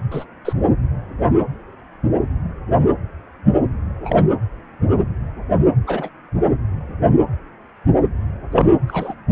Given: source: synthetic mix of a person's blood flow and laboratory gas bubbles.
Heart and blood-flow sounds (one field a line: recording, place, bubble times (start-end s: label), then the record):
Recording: Doppler ultrasound of blood flow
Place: precordium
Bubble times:
0.11-0.24 s: bubbles
0.45-0.53 s: bubbles
4.02-4.27 s: bubbles
5.87-6.10 s: bubbles
8.52-8.71 s: bubbles
8.88-9.14 s: bubbles
From the record:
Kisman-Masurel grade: 122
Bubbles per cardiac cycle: 1 to 2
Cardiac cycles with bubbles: 10 to 50%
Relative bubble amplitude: moderate (0.250 to 0.450)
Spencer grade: 2 (many but less than half of the cardiac periods contain bubble signals, singularly or in groups)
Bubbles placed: anywhere in the cardiac cycle